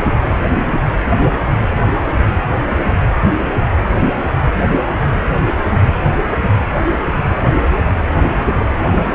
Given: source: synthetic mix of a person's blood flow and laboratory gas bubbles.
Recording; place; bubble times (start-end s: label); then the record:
Doppler ultrasound of blood flow; precordium
no bubbles
From the record:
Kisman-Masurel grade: 000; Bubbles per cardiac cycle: 0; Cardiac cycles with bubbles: 0%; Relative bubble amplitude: no bubbles discernible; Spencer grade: 0 (complete lack of bubble signals)